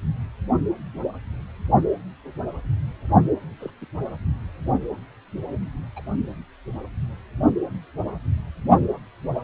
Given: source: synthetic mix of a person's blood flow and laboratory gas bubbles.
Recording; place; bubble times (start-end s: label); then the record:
Doppler ultrasound of blood flow; precordium
3.60-3.71 s: bubbles
3.81-3.85 s: bubbles
5.96-6.02 s: bubbles
From the record:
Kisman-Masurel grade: 111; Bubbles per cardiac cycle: 1 to 2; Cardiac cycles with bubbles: 1 to 10%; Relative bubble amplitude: barely perceptible (0.100 to 0.250); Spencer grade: 1 (occasional bubble signal discernible with the cardiac motion signal, with majority of cardiac periods free of bubbles); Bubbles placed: anywhere in the cardiac cycle